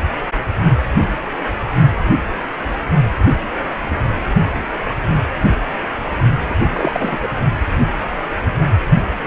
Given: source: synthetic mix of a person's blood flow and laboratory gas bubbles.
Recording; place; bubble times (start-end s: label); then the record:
Doppler ultrasound of blood flow; precordium
6.50-6.55 s: bubbles
6.72-7.18 s: bubbles
7.21-7.28 s: bubbles
From the record:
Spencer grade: 1 (occasional bubble signal discernible with the cardiac motion signal, with majority of cardiac periods free of bubbles); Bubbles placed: only in the low amplitude regions of the cardiac cycle